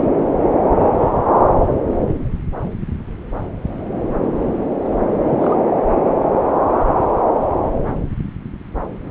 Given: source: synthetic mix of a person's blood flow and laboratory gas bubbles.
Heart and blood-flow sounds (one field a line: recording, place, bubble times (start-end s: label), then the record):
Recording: Doppler ultrasound of blood flow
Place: subclavian vein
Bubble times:
5.25-5.56 s: bubbles
From the record:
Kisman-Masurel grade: 112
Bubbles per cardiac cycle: 1 to 2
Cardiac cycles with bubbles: 1 to 10%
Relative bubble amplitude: moderate (0.250 to 0.450)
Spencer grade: 1 (occasional bubble signal discernible with the cardiac motion signal, with majority of cardiac periods free of bubbles)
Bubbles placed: anywhere in the cardiac cycle